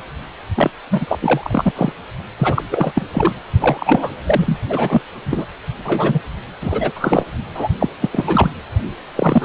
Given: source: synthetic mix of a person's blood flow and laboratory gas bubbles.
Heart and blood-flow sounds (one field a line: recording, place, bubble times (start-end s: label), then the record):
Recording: Doppler ultrasound of blood flow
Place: precordium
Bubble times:
0.55-0.70 s: bubbles
0.90-1.17 s: bubbles
1.21-1.72 s: bubbles
1.75-1.92 s: bubbles
2.38-2.62 s: bubbles
2.71-3.06 s: bubbles
3.12-3.32 s: bubbles
3.60-4.10 s: bubbles
4.26-4.58 s: bubbles
4.69-5.01 s: bubbles
5.25-5.45 s: bubbles
5.84-6.20 s: bubbles
6.61-6.91 s: bubbles
6.95-7.25 s: bubbles
7.54-7.68 s: bubbles
7.80-7.89 s: bubbles
8.00-8.09 s: bubbles
8.12-8.50 s: bubbles
9.15-9.45 s: bubbles
From the record:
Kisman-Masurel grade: 333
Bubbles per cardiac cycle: rolling drumbeat, 9 or more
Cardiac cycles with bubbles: 50 to 99%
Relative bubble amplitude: loud (0.450 to 0.775)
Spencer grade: 3 (all of the cardiac periods contain showers or single bubble signals, but not dominating or overriding the cardiac motion signals)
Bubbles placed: only in the low amplitude regions of the cardiac cycle